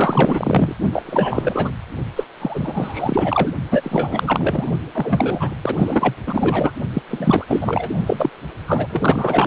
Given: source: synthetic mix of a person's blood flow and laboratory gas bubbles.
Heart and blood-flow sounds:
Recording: Doppler ultrasound of blood flow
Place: precordium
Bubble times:
0.00-0.75 s: bubbles
0.92-1.02 s: bubbles
1.05-1.72 s: bubbles
2.15-2.24 s: bubbles
2.40-3.52 s: bubbles
3.71-4.65 s: bubbles
4.93-5.55 s: bubbles
5.62-6.14 s: bubbles
6.26-6.71 s: bubbles
6.93-7.02 s: bubbles
7.08-7.45 s: bubbles
7.47-7.90 s: bubbles
8.06-8.30 s: bubbles
8.67-8.87 s: bubbles
8.90-9.47 s: bubbles
From the record:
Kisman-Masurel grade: 444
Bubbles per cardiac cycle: continuous sound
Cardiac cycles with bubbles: 100%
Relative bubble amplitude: maximal (0.775 to 0.999)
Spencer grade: 4 (maximum detectable bubble signal sounding continuously throughout systole and diastole of every cardiac period, and overriding the amplitude of the normal cardiac signals)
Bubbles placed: only in the low amplitude regions of the cardiac cycle

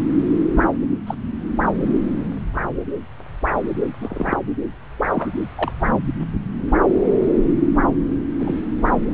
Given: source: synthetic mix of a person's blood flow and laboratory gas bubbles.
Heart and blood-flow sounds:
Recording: Doppler ultrasound of blood flow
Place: subclavian vein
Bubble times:
1.06-1.15 s: bubbles
4.00-4.37 s: bubbles
5.13-5.30 s: bubbles
5.57-5.71 s: bubbles
8.39-8.55 s: bubbles
From the record:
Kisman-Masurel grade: 122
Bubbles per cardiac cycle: 1 to 2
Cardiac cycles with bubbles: 10 to 50%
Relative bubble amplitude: moderate (0.250 to 0.450)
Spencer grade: 2 (many but less than half of the cardiac periods contain bubble signals, singularly or in groups)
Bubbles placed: anywhere in the cardiac cycle

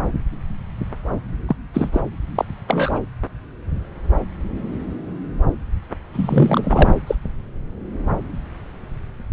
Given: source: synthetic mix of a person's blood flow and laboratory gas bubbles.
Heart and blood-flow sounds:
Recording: Doppler ultrasound of blood flow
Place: subclavian vein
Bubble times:
1.47-1.56 s: bubbles
1.74-2.00 s: bubbles
2.35-2.45 s: bubbles
2.67-3.00 s: bubbles
6.12-6.91 s: bubbles
7.07-7.15 s: bubbles
From the record:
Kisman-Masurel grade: 223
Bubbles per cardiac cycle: several, 3 to 8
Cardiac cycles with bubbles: 10 to 50%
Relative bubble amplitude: loud (0.450 to 0.775)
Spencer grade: 2 (many but less than half of the cardiac periods contain bubble signals, singularly or in groups)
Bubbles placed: anywhere in the cardiac cycle

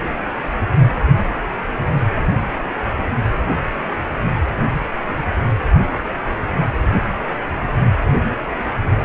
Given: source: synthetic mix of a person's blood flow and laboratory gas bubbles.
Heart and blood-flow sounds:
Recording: Doppler ultrasound of blood flow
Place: precordium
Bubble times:
no bubbles
From the record:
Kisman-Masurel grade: 000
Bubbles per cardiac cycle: 0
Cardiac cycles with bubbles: 0%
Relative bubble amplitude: no bubbles discernible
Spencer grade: 0 (complete lack of bubble signals)

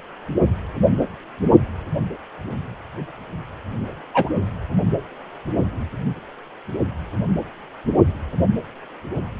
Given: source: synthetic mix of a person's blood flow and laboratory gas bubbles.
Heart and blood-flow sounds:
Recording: Doppler ultrasound of blood flow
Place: precordium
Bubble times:
4.14-4.29 s: bubbles
From the record:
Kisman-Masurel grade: 113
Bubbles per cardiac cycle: 1 to 2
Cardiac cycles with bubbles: 1 to 10%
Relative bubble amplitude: loud (0.450 to 0.775)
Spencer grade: 1 (occasional bubble signal discernible with the cardiac motion signal, with majority of cardiac periods free of bubbles)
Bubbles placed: only in the low amplitude regions of the cardiac cycle

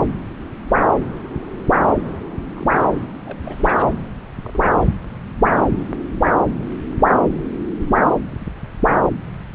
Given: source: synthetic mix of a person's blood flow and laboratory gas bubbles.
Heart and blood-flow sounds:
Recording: Doppler ultrasound of blood flow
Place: subclavian vein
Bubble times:
2.57-2.87 s: bubbles
3.26-3.39 s: bubbles
3.44-3.90 s: bubbles
4.43-4.64 s: bubbles
4.76-4.85 s: bubbles
4.89-4.93 s: bubbles
From the record:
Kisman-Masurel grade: 221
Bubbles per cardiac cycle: several, 3 to 8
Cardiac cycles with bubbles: 10 to 50%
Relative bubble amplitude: barely perceptible (0.100 to 0.250)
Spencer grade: 2 (many but less than half of the cardiac periods contain bubble signals, singularly or in groups)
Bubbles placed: anywhere in the cardiac cycle

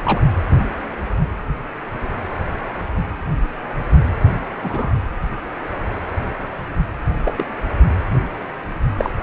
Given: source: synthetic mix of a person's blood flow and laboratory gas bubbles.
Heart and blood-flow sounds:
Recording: Doppler ultrasound of blood flow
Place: precordium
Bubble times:
0.00-0.22 s: bubbles
4.63-4.93 s: bubbles
7.25-7.33 s: bubbles
7.36-7.46 s: bubbles
8.98-9.14 s: bubbles
From the record:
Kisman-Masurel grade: 122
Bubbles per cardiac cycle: 1 to 2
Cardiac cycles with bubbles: 10 to 50%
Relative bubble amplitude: moderate (0.250 to 0.450)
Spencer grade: 2 (many but less than half of the cardiac periods contain bubble signals, singularly or in groups)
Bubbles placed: anywhere in the cardiac cycle

